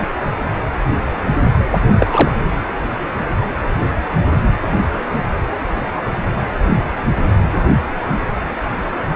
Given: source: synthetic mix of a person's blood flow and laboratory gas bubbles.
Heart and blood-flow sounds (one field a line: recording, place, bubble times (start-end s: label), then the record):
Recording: Doppler ultrasound of blood flow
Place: precordium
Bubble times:
2.00-2.31 s: bubbles
From the record:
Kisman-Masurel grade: 213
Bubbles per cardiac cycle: several, 3 to 8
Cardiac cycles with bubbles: 1 to 10%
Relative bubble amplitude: loud (0.450 to 0.775)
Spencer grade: 1 (occasional bubble signal discernible with the cardiac motion signal, with majority of cardiac periods free of bubbles)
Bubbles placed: anywhere in the cardiac cycle